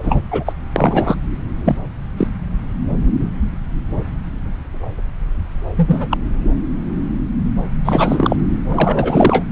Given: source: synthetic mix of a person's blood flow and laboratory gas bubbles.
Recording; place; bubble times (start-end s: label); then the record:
Doppler ultrasound of blood flow; subclavian vein
0.03-0.23 s: bubbles
0.31-0.53 s: bubbles
0.76-1.15 s: bubbles
1.65-1.76 s: bubbles
2.17-2.28 s: bubbles
5.76-6.17 s: bubbles
7.85-8.36 s: bubbles
8.69-9.44 s: bubbles
From the record:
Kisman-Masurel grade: 223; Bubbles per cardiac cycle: several, 3 to 8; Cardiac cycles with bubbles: 10 to 50%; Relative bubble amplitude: loud (0.450 to 0.775); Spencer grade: 2 (many but less than half of the cardiac periods contain bubble signals, singularly or in groups); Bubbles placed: anywhere in the cardiac cycle